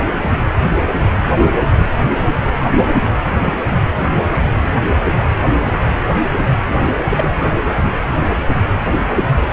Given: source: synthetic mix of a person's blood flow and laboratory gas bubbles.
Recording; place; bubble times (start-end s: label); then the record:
Doppler ultrasound of blood flow; precordium
7.09-7.29 s: bubbles
From the record:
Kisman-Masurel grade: 112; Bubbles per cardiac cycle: 1 to 2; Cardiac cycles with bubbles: 1 to 10%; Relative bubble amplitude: moderate (0.250 to 0.450); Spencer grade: 1 (occasional bubble signal discernible with the cardiac motion signal, with majority of cardiac periods free of bubbles); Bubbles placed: anywhere in the cardiac cycle